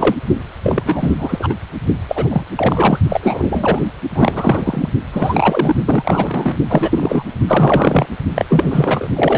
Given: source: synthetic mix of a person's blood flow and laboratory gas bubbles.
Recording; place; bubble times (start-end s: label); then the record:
Doppler ultrasound of blood flow; precordium
0.00-0.15 s: bubbles
0.63-1.54 s: bubbles
2.08-2.45 s: bubbles
2.56-3.00 s: bubbles
3.09-3.85 s: bubbles
4.15-4.88 s: bubbles
5.12-5.75 s: bubbles
5.85-6.56 s: bubbles
6.69-7.34 s: bubbles
7.47-8.06 s: bubbles
8.34-8.45 s: bubbles
8.49-9.07 s: bubbles
9.15-9.38 s: bubbles
From the record:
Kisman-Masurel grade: 333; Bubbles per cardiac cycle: rolling drumbeat, 9 or more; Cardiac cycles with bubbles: 50 to 99%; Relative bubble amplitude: loud (0.450 to 0.775); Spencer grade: 3 (all of the cardiac periods contain showers or single bubble signals, but not dominating or overriding the cardiac motion signals); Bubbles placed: only in the low amplitude regions of the cardiac cycle